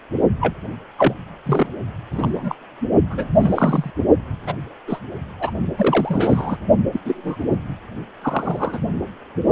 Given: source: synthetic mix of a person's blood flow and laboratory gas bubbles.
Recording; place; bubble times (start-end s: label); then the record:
Doppler ultrasound of blood flow; precordium
0.41-0.54 s: bubbles
0.97-1.14 s: bubbles
1.46-1.67 s: bubbles
2.11-2.55 s: bubbles
3.10-3.28 s: bubbles
3.35-3.91 s: bubbles
4.46-4.54 s: bubbles
4.87-4.99 s: bubbles
5.39-5.51 s: bubbles
5.77-6.56 s: bubbles
6.92-7.00 s: bubbles
7.05-7.45 s: bubbles
7.50-7.57 s: bubbles
8.21-8.79 s: bubbles
From the record:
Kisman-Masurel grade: 232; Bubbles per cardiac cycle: several, 3 to 8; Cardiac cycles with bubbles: 50 to 99%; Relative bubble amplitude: moderate (0.250 to 0.450); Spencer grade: 3 (all of the cardiac periods contain showers or single bubble signals, but not dominating or overriding the cardiac motion signals); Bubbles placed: only in the low amplitude regions of the cardiac cycle